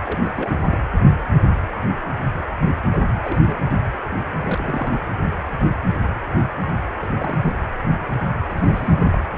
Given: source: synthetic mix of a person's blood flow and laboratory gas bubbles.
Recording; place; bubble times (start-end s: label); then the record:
Doppler ultrasound of blood flow; precordium
0.05-0.31 s: bubbles
0.35-0.81 s: bubbles
2.93-2.98 s: bubbles
3.25-3.56 s: bubbles
4.40-4.94 s: bubbles
7.01-7.10 s: bubbles
7.18-7.38 s: bubbles
7.42-7.52 s: bubbles
8.50-9.18 s: bubbles
From the record:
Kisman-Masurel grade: 221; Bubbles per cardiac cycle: several, 3 to 8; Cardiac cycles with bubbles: 10 to 50%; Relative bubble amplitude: barely perceptible (0.100 to 0.250); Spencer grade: 2 (many but less than half of the cardiac periods contain bubble signals, singularly or in groups); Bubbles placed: anywhere in the cardiac cycle